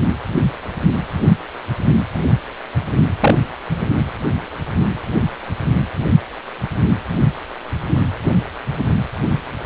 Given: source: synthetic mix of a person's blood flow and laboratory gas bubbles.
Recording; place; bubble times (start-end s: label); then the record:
Doppler ultrasound of blood flow; precordium
3.20-3.35 s: bubbles
From the record:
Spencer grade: 2 (many but less than half of the cardiac periods contain bubble signals, singularly or in groups); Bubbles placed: anywhere in the cardiac cycle